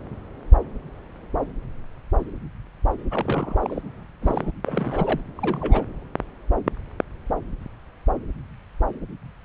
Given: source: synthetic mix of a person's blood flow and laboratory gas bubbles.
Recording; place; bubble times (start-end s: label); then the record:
Doppler ultrasound of blood flow; subclavian vein
3.11-3.82 s: bubbles
4.21-4.51 s: bubbles
4.66-5.20 s: bubbles
5.37-5.84 s: bubbles
From the record:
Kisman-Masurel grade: 221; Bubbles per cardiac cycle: several, 3 to 8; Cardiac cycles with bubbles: 10 to 50%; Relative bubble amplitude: barely perceptible (0.100 to 0.250); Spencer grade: 2 (many but less than half of the cardiac periods contain bubble signals, singularly or in groups); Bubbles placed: anywhere in the cardiac cycle